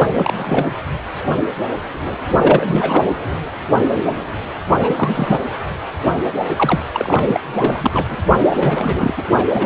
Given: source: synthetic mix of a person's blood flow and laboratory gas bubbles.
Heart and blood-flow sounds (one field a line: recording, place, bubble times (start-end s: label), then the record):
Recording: Doppler ultrasound of blood flow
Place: precordium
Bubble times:
0.00-0.08 s: bubbles
0.12-0.67 s: bubbles
2.38-3.16 s: bubbles
4.78-5.39 s: bubbles
6.56-6.84 s: bubbles
6.93-7.40 s: bubbles
7.55-8.18 s: bubbles
8.41-9.13 s: bubbles
9.17-9.23 s: bubbles
9.33-9.66 s: bubbles
From the record:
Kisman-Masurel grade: 332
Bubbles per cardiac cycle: rolling drumbeat, 9 or more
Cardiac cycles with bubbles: 50 to 99%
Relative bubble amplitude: moderate (0.250 to 0.450)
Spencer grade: 3 (all of the cardiac periods contain showers or single bubble signals, but not dominating or overriding the cardiac motion signals)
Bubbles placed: anywhere in the cardiac cycle